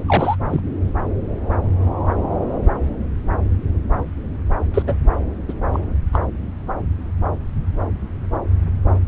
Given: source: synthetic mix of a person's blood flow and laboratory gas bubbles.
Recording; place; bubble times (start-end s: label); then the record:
Doppler ultrasound of blood flow; subclavian vein
0.06-0.37 s: bubbles
0.50-0.60 s: bubbles
4.73-4.83 s: bubbles
4.86-4.95 s: bubbles
5.48-5.54 s: bubbles
5.73-5.79 s: bubbles
6.12-6.19 s: bubbles
From the record:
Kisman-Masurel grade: 222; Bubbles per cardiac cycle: several, 3 to 8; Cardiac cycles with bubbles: 10 to 50%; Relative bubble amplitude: moderate (0.250 to 0.450); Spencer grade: 2 (many but less than half of the cardiac periods contain bubble signals, singularly or in groups); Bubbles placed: anywhere in the cardiac cycle